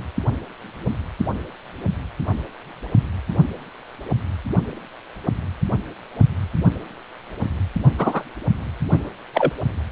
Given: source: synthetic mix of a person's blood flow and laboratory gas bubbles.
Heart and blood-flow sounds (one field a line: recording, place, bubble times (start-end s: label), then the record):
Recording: Doppler ultrasound of blood flow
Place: precordium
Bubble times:
7.99-8.23 s: bubbles
8.91-9.10 s: bubbles
9.34-9.50 s: bubbles
From the record:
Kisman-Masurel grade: 123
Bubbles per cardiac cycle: 1 to 2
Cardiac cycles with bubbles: 10 to 50%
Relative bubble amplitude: loud (0.450 to 0.775)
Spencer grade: 2 (many but less than half of the cardiac periods contain bubble signals, singularly or in groups)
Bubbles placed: anywhere in the cardiac cycle